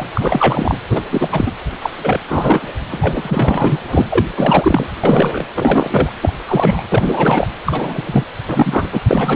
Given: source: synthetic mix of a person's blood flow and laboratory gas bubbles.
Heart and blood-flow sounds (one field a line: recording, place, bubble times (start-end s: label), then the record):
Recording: Doppler ultrasound of blood flow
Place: precordium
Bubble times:
0.00-0.06 s: bubbles
0.13-0.78 s: bubbles
0.90-1.01 s: bubbles
1.11-1.29 s: bubbles
1.31-1.53 s: bubbles
1.81-1.90 s: bubbles
2.04-2.21 s: bubbles
2.27-2.73 s: bubbles
2.91-3.79 s: bubbles
3.90-4.06 s: bubbles
4.10-4.26 s: bubbles
4.36-4.87 s: bubbles
5.03-5.45 s: bubbles
5.54-6.09 s: bubbles
6.21-6.33 s: bubbles
6.47-6.82 s: bubbles
6.89-7.47 s: bubbles
7.66-8.25 s: bubbles
8.47-8.88 s: bubbles
8.92-9.01 s: bubbles
9.08-9.35 s: bubbles
From the record:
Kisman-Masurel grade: 343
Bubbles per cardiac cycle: rolling drumbeat, 9 or more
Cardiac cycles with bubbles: 100%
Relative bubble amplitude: loud (0.450 to 0.775)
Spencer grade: 3 (all of the cardiac periods contain showers or single bubble signals, but not dominating or overriding the cardiac motion signals)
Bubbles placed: anywhere in the cardiac cycle